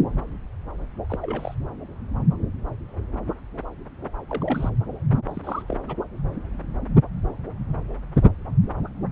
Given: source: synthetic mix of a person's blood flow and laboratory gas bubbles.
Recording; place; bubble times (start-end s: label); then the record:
Doppler ultrasound of blood flow; subclavian vein
1.09-1.18 s: bubbles
1.22-1.55 s: bubbles
4.29-4.70 s: bubbles
5.12-5.17 s: bubbles
5.28-5.62 s: bubbles
5.69-5.77 s: bubbles
5.88-5.96 s: bubbles
From the record:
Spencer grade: 2 (many but less than half of the cardiac periods contain bubble signals, singularly or in groups); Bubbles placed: anywhere in the cardiac cycle